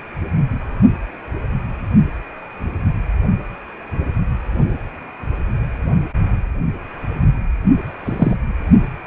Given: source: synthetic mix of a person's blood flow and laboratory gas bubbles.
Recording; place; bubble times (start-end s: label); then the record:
Doppler ultrasound of blood flow; precordium
8.05-8.37 s: bubbles
From the record:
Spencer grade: 1 (occasional bubble signal discernible with the cardiac motion signal, with majority of cardiac periods free of bubbles); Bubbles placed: only in the low amplitude regions of the cardiac cycle